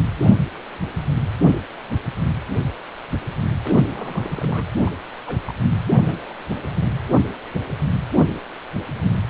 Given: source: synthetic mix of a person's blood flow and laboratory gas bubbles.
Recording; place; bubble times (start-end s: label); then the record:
Doppler ultrasound of blood flow; precordium
3.63-3.83 s: bubbles
3.93-4.67 s: bubbles
4.80-4.96 s: bubbles
5.16-5.21 s: bubbles
5.26-5.37 s: bubbles
5.47-5.54 s: bubbles
5.94-6.21 s: bubbles
6.27-6.33 s: bubbles
From the record:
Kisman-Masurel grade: 221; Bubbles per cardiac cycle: several, 3 to 8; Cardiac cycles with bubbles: 10 to 50%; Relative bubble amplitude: barely perceptible (0.100 to 0.250); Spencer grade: 2 (many but less than half of the cardiac periods contain bubble signals, singularly or in groups); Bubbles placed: anywhere in the cardiac cycle